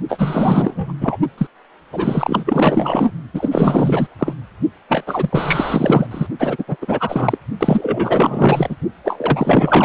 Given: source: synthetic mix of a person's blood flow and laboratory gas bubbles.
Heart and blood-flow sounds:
Doppler ultrasound of blood flow; precordium
0.08-0.93 s: bubbles
1.00-1.17 s: bubbles
1.38-1.47 s: bubbles
1.92-3.12 s: bubbles
3.33-4.07 s: bubbles
4.19-4.33 s: bubbles
4.88-5.04 s: bubbles
5.07-6.07 s: bubbles
6.11-6.27 s: bubbles
6.39-6.64 s: bubbles
6.67-6.77 s: bubbles
6.81-7.38 s: bubbles
7.59-8.76 s: bubbles
9.04-9.85 s: bubbles
From the record:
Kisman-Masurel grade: 444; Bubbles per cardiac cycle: continuous sound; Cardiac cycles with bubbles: 100%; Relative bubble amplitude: maximal (0.775 to 0.999); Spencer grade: 4 (maximum detectable bubble signal sounding continuously throughout systole and diastole of every cardiac period, and overriding the amplitude of the normal cardiac signals); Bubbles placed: only in the low amplitude regions of the cardiac cycle

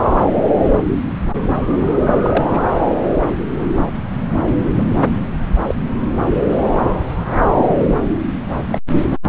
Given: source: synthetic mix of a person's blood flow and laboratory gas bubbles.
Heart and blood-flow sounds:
Doppler ultrasound of blood flow; subclavian vein
2.22-2.46 s: bubbles
2.49-2.63 s: bubbles
4.76-4.82 s: bubbles
5.65-5.75 s: bubbles
8.72-8.79 s: bubbles
From the record:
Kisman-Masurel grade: 122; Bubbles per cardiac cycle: 1 to 2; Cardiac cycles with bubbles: 10 to 50%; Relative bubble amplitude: moderate (0.250 to 0.450); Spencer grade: 2 (many but less than half of the cardiac periods contain bubble signals, singularly or in groups); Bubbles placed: anywhere in the cardiac cycle

